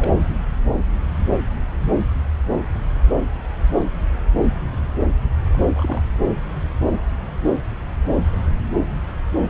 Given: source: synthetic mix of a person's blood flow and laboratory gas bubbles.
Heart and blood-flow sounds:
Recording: Doppler ultrasound of blood flow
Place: subclavian vein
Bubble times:
0.00-0.21 s: bubbles
5.52-6.01 s: bubbles
From the record:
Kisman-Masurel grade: 221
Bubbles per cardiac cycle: several, 3 to 8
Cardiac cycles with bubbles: 10 to 50%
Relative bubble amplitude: barely perceptible (0.100 to 0.250)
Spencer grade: 2 (many but less than half of the cardiac periods contain bubble signals, singularly or in groups)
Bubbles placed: anywhere in the cardiac cycle

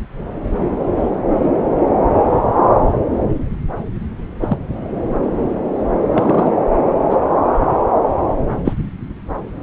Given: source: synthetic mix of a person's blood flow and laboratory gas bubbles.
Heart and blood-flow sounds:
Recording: Doppler ultrasound of blood flow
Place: subclavian vein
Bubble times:
4.41-4.58 s: bubbles
6.08-6.54 s: bubbles
7.09-7.17 s: bubbles
8.65-8.73 s: bubbles
From the record:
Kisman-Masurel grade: 123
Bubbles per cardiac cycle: 1 to 2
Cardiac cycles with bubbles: 10 to 50%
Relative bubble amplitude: loud (0.450 to 0.775)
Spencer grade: 2 (many but less than half of the cardiac periods contain bubble signals, singularly or in groups)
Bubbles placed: anywhere in the cardiac cycle

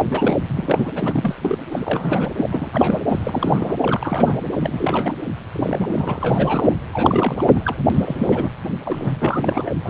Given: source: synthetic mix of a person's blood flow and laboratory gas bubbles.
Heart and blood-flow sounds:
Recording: Doppler ultrasound of blood flow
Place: precordium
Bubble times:
0.00-0.06 s: bubbles
0.11-0.90 s: bubbles
0.95-1.35 s: bubbles
1.41-1.58 s: bubbles
1.72-2.29 s: bubbles
2.38-2.71 s: bubbles
2.73-3.01 s: bubbles
3.08-3.74 s: bubbles
3.82-4.40 s: bubbles
4.52-5.12 s: bubbles
5.53-6.75 s: bubbles
6.92-7.75 s: bubbles
7.90-8.49 s: bubbles
8.85-9.71 s: bubbles
9.85-9.89 s: bubbles
From the record:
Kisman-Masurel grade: 342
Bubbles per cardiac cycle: rolling drumbeat, 9 or more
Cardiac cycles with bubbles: 100%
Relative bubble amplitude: moderate (0.250 to 0.450)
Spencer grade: 3 (all of the cardiac periods contain showers or single bubble signals, but not dominating or overriding the cardiac motion signals)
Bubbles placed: anywhere in the cardiac cycle

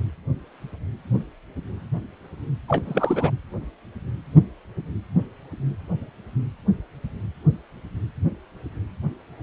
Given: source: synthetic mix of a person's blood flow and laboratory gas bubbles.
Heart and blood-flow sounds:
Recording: Doppler ultrasound of blood flow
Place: precordium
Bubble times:
2.68-2.83 s: bubbles
2.85-3.30 s: bubbles
From the record:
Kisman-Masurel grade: 212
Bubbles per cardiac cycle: several, 3 to 8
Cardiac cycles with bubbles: 1 to 10%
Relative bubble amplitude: moderate (0.250 to 0.450)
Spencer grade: 1 (occasional bubble signal discernible with the cardiac motion signal, with majority of cardiac periods free of bubbles)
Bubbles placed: anywhere in the cardiac cycle

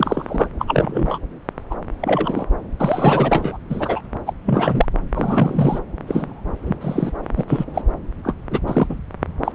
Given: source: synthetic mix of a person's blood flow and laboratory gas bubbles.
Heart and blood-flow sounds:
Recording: Doppler ultrasound of blood flow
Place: subclavian vein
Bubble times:
0.00-0.48 s: bubbles
0.58-1.18 s: bubbles
1.70-1.74 s: bubbles
2.01-2.47 s: bubbles
2.79-3.58 s: bubbles
3.69-4.00 s: bubbles
4.26-4.33 s: bubbles
4.46-4.85 s: bubbles
5.14-5.79 s: bubbles
6.07-6.41 s: bubbles
6.64-6.76 s: bubbles
6.81-7.12 s: bubbles
7.36-7.44 s: bubbles
7.48-7.65 s: bubbles
7.74-7.82 s: bubbles
8.24-8.34 s: bubbles
8.51-8.60 s: bubbles
8.67-8.96 s: bubbles
9.44-9.52 s: bubbles
From the record:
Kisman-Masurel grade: 243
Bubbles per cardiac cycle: several, 3 to 8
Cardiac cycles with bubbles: 100%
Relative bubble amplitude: loud (0.450 to 0.775)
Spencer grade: 3 (all of the cardiac periods contain showers or single bubble signals, but not dominating or overriding the cardiac motion signals)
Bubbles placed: anywhere in the cardiac cycle

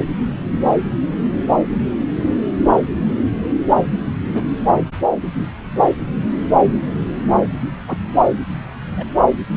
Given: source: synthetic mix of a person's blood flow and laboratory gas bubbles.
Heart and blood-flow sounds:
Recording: Doppler ultrasound of blood flow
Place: subclavian vein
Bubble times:
4.34-4.42 s: bubbles
6.56-6.64 s: bubbles
7.87-7.99 s: bubbles
8.95-9.04 s: bubbles
From the record:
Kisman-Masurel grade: 121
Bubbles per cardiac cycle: 1 to 2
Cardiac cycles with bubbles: 10 to 50%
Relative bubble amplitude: barely perceptible (0.100 to 0.250)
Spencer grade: 2 (many but less than half of the cardiac periods contain bubble signals, singularly or in groups)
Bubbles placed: anywhere in the cardiac cycle

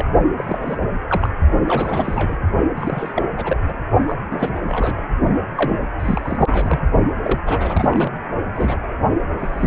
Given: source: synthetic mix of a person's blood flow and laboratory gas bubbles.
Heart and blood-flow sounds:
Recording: Doppler ultrasound of blood flow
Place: precordium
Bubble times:
0.00-0.11 s: bubbles
0.38-0.78 s: bubbles
1.09-1.29 s: bubbles
1.67-2.38 s: bubbles
2.75-3.23 s: bubbles
3.34-3.57 s: bubbles
3.68-3.77 s: bubbles
4.07-4.16 s: bubbles
4.30-4.62 s: bubbles
4.65-5.05 s: bubbles
5.57-5.76 s: bubbles
5.98-6.79 s: bubbles
7.22-7.40 s: bubbles
7.45-8.11 s: bubbles
8.54-8.78 s: bubbles
9.39-9.67 s: bubbles
From the record:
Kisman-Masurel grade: 342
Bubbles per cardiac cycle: rolling drumbeat, 9 or more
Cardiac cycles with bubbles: 100%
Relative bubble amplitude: moderate (0.250 to 0.450)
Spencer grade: 3 (all of the cardiac periods contain showers or single bubble signals, but not dominating or overriding the cardiac motion signals)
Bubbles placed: only in the low amplitude regions of the cardiac cycle

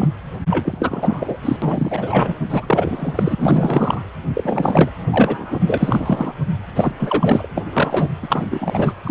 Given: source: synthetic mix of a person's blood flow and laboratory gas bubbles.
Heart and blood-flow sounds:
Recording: Doppler ultrasound of blood flow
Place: precordium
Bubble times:
0.00-0.08 s: bubbles
0.49-1.37 s: bubbles
1.43-1.57 s: bubbles
1.62-2.33 s: bubbles
2.50-3.35 s: bubbles
3.38-4.02 s: bubbles
4.35-4.90 s: bubbles
5.11-5.60 s: bubbles
5.62-6.32 s: bubbles
6.75-6.93 s: bubbles
6.99-7.50 s: bubbles
7.56-7.65 s: bubbles
7.73-8.09 s: bubbles
8.22-8.45 s: bubbles
8.50-8.93 s: bubbles
9.04-9.11 s: bubbles
From the record:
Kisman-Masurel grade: 343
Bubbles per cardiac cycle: rolling drumbeat, 9 or more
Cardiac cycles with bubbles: 100%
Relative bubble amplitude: loud (0.450 to 0.775)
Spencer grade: 3 (all of the cardiac periods contain showers or single bubble signals, but not dominating or overriding the cardiac motion signals)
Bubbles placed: anywhere in the cardiac cycle

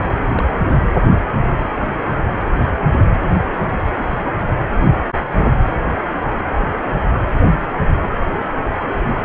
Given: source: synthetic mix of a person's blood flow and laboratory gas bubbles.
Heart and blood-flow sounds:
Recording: Doppler ultrasound of blood flow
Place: precordium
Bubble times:
0.00-0.44 s: bubbles
From the record:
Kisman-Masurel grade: 112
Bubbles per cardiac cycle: 1 to 2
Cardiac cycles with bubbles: 1 to 10%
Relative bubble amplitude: moderate (0.250 to 0.450)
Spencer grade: 1 (occasional bubble signal discernible with the cardiac motion signal, with majority of cardiac periods free of bubbles)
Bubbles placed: anywhere in the cardiac cycle

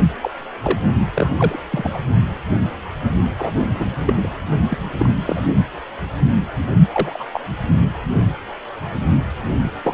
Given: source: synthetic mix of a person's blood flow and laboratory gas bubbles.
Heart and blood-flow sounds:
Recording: Doppler ultrasound of blood flow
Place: precordium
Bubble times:
0.00-0.02 s: bubbles
0.21-0.31 s: bubbles
0.62-0.80 s: bubbles
1.15-1.28 s: bubbles
1.36-1.59 s: bubbles
1.71-1.98 s: bubbles
3.39-3.48 s: bubbles
3.74-4.14 s: bubbles
4.23-4.30 s: bubbles
4.70-4.78 s: bubbles
4.99-5.10 s: bubbles
5.25-5.47 s: bubbles
6.91-7.25 s: bubbles
7.33-7.41 s: bubbles
9.54-9.60 s: bubbles
9.63-9.71 s: bubbles
9.84-9.94 s: bubbles
From the record:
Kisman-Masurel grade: 232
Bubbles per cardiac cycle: several, 3 to 8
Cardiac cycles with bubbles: 50 to 99%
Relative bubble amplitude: moderate (0.250 to 0.450)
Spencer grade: 3 (all of the cardiac periods contain showers or single bubble signals, but not dominating or overriding the cardiac motion signals)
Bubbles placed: only in the low amplitude regions of the cardiac cycle

